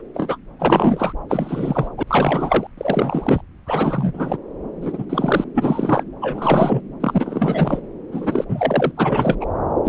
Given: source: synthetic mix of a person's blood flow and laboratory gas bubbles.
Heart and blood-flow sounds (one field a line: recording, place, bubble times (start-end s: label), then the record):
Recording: Doppler ultrasound of blood flow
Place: subclavian vein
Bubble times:
0.14-0.38 s: bubbles
0.59-1.12 s: bubbles
1.29-1.88 s: bubbles
1.97-2.03 s: bubbles
2.07-2.67 s: bubbles
2.77-3.41 s: bubbles
3.66-4.37 s: bubbles
4.81-5.05 s: bubbles
5.09-5.45 s: bubbles
5.54-6.04 s: bubbles
6.21-6.81 s: bubbles
7.00-7.80 s: bubbles
8.12-8.45 s: bubbles
8.48-8.92 s: bubbles
8.96-9.37 s: bubbles
9.40-9.46 s: bubbles
9.85-9.89 s: bubbles
From the record:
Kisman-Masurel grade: 343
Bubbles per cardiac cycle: rolling drumbeat, 9 or more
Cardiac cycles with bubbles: 100%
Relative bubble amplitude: loud (0.450 to 0.775)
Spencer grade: 3 (all of the cardiac periods contain showers or single bubble signals, but not dominating or overriding the cardiac motion signals)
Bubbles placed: anywhere in the cardiac cycle